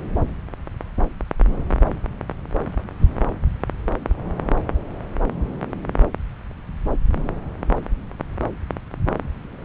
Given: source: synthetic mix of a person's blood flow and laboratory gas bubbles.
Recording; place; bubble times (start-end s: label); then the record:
Doppler ultrasound of blood flow; subclavian vein
no bubbles
From the record:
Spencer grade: 0 (complete lack of bubble signals)